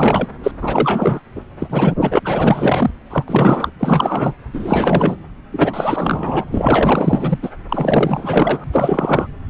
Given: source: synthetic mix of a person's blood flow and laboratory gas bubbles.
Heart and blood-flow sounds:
Doppler ultrasound of blood flow; subclavian vein
0.00-0.28 s: bubbles
0.43-0.51 s: bubbles
0.61-1.20 s: bubbles
1.35-1.42 s: bubbles
1.59-1.95 s: bubbles
2.00-2.19 s: bubbles
2.24-2.90 s: bubbles
3.10-3.24 s: bubbles
3.28-3.70 s: bubbles
3.79-4.35 s: bubbles
4.53-5.17 s: bubbles
5.52-6.45 s: bubbles
6.52-7.39 s: bubbles
7.42-7.50 s: bubbles
7.69-8.64 s: bubbles
8.72-9.27 s: bubbles
From the record:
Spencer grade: 4 (maximum detectable bubble signal sounding continuously throughout systole and diastole of every cardiac period, and overriding the amplitude of the normal cardiac signals); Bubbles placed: anywhere in the cardiac cycle

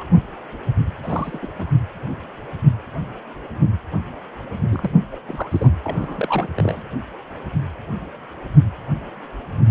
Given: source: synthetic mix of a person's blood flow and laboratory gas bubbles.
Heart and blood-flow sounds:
Doppler ultrasound of blood flow; precordium
0.00-0.04 s: bubbles
1.02-1.40 s: bubbles
1.42-1.47 s: bubbles
1.59-1.73 s: bubbles
4.69-4.91 s: bubbles
5.12-5.21 s: bubbles
5.28-5.70 s: bubbles
5.83-6.48 s: bubbles
6.57-6.83 s: bubbles
From the record:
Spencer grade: 2 (many but less than half of the cardiac periods contain bubble signals, singularly or in groups); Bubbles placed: anywhere in the cardiac cycle

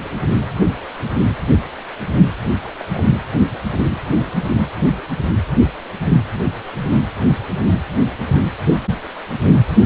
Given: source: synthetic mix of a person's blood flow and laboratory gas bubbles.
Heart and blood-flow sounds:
Doppler ultrasound of blood flow; precordium
0.44-0.52 s: bubbles
2.80-2.85 s: bubbles
2.93-3.09 s: bubbles
From the record:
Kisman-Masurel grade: 121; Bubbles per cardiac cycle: 1 to 2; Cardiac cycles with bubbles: 10 to 50%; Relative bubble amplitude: barely perceptible (0.100 to 0.250); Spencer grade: 2 (many but less than half of the cardiac periods contain bubble signals, singularly or in groups); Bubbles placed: anywhere in the cardiac cycle

